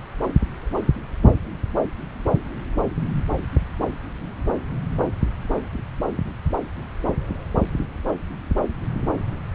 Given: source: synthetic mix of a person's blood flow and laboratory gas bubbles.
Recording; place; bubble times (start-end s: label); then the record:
Doppler ultrasound of blood flow; subclavian vein
no bubbles
From the record:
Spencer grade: 0 (complete lack of bubble signals)